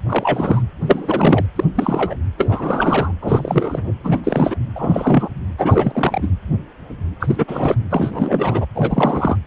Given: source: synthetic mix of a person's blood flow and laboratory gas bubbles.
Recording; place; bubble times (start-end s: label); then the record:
Doppler ultrasound of blood flow; precordium
0.08-0.62 s: bubbles
0.80-1.46 s: bubbles
1.55-1.65 s: bubbles
1.75-2.17 s: bubbles
2.37-3.12 s: bubbles
3.21-3.94 s: bubbles
4.03-4.21 s: bubbles
4.23-4.56 s: bubbles
4.75-5.29 s: bubbles
5.58-6.29 s: bubbles
7.20-7.76 s: bubbles
7.90-8.65 s: bubbles
8.75-9.37 s: bubbles
From the record:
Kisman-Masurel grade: 332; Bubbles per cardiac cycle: rolling drumbeat, 9 or more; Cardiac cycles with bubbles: 50 to 99%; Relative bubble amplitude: moderate (0.250 to 0.450); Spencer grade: 3 (all of the cardiac periods contain showers or single bubble signals, but not dominating or overriding the cardiac motion signals); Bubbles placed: anywhere in the cardiac cycle